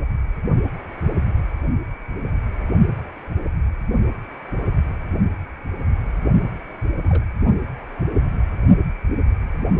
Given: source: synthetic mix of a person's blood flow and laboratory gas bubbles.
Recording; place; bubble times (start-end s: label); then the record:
Doppler ultrasound of blood flow; precordium
7.03-7.25 s: bubbles
From the record:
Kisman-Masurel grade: 111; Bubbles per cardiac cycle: 1 to 2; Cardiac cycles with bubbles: 1 to 10%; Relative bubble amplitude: barely perceptible (0.100 to 0.250); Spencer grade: 1 (occasional bubble signal discernible with the cardiac motion signal, with majority of cardiac periods free of bubbles); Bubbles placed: only in the low amplitude regions of the cardiac cycle